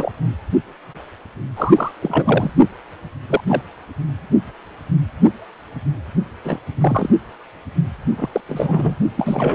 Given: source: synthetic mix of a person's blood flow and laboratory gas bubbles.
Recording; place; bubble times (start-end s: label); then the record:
Doppler ultrasound of blood flow; precordium
0.00-0.12 s: bubbles
1.56-1.92 s: bubbles
2.02-2.52 s: bubbles
3.28-3.41 s: bubbles
3.49-3.62 s: bubbles
6.44-6.59 s: bubbles
6.80-7.09 s: bubbles
8.17-8.29 s: bubbles
8.33-8.41 s: bubbles
8.48-8.94 s: bubbles
9.17-9.55 s: bubbles
From the record:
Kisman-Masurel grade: 222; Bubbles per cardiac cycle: several, 3 to 8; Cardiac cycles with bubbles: 10 to 50%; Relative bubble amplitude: moderate (0.250 to 0.450); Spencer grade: 2 (many but less than half of the cardiac periods contain bubble signals, singularly or in groups); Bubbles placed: only in the low amplitude regions of the cardiac cycle